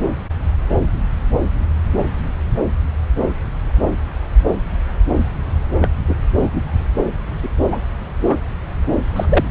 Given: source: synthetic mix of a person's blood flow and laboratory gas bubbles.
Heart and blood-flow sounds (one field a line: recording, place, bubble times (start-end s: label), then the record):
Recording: Doppler ultrasound of blood flow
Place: subclavian vein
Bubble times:
5.81-5.89 s: bubbles
6.07-6.16 s: bubbles
6.39-6.85 s: bubbles
7.42-7.49 s: bubbles
7.72-7.81 s: bubbles
8.27-8.36 s: bubbles
9.16-9.25 s: bubbles
9.29-9.45 s: bubbles
From the record:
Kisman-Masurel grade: 123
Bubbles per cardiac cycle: 1 to 2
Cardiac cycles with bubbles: 10 to 50%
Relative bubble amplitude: loud (0.450 to 0.775)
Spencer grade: 2 (many but less than half of the cardiac periods contain bubble signals, singularly or in groups)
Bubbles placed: anywhere in the cardiac cycle